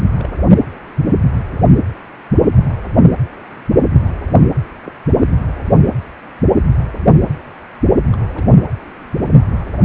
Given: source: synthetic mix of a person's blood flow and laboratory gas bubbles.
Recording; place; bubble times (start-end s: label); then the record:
Doppler ultrasound of blood flow; precordium
0.14-0.29 s: bubbles
0.42-0.56 s: bubbles
4.83-4.91 s: bubbles
8.12-8.16 s: bubbles
8.30-8.44 s: bubbles
From the record:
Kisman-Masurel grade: 121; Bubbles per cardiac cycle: 1 to 2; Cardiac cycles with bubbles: 10 to 50%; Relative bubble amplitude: barely perceptible (0.100 to 0.250); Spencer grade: 2 (many but less than half of the cardiac periods contain bubble signals, singularly or in groups); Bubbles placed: anywhere in the cardiac cycle